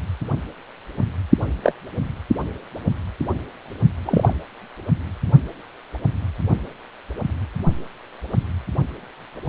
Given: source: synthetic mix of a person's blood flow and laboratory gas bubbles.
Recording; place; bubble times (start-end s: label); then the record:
Doppler ultrasound of blood flow; precordium
1.63-1.73 s: bubbles
4.05-4.33 s: bubbles
From the record:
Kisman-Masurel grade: 123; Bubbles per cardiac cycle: 1 to 2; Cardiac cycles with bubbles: 10 to 50%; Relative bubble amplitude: loud (0.450 to 0.775); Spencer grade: 2 (many but less than half of the cardiac periods contain bubble signals, singularly or in groups); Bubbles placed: anywhere in the cardiac cycle